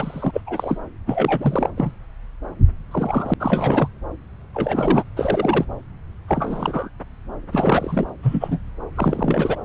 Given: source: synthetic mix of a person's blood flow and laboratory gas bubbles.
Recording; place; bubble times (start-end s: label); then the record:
Doppler ultrasound of blood flow; subclavian vein
0.00-0.41 s: bubbles
0.47-0.79 s: bubbles
1.06-1.70 s: bubbles
1.77-1.92 s: bubbles
2.91-3.34 s: bubbles
3.40-3.88 s: bubbles
4.54-5.04 s: bubbles
5.17-5.65 s: bubbles
6.28-6.90 s: bubbles
7.52-8.08 s: bubbles
8.22-8.58 s: bubbles
8.96-9.56 s: bubbles
From the record:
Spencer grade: 3 (all of the cardiac periods contain showers or single bubble signals, but not dominating or overriding the cardiac motion signals); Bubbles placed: anywhere in the cardiac cycle